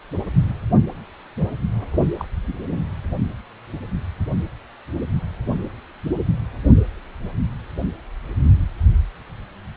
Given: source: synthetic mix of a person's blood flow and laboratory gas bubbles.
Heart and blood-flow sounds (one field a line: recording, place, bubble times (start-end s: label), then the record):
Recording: Doppler ultrasound of blood flow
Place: precordium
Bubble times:
2.18-2.25 s: bubbles
2.47-2.53 s: bubbles
2.69-2.79 s: bubbles
From the record:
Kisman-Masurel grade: 221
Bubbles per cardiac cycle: several, 3 to 8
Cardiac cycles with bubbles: 10 to 50%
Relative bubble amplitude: barely perceptible (0.100 to 0.250)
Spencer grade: 2 (many but less than half of the cardiac periods contain bubble signals, singularly or in groups)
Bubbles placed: only in the low amplitude regions of the cardiac cycle